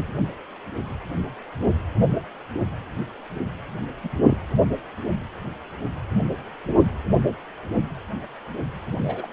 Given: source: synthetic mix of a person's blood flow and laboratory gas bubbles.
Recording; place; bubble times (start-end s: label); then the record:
Doppler ultrasound of blood flow; precordium
0.00-0.03 s: bubbles
4.04-4.08 s: bubbles
4.23-4.37 s: bubbles
8.91-9.27 s: bubbles
From the record:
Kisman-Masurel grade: 221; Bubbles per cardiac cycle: several, 3 to 8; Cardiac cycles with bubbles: 10 to 50%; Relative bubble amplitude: barely perceptible (0.100 to 0.250); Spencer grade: 2 (many but less than half of the cardiac periods contain bubble signals, singularly or in groups); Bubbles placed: anywhere in the cardiac cycle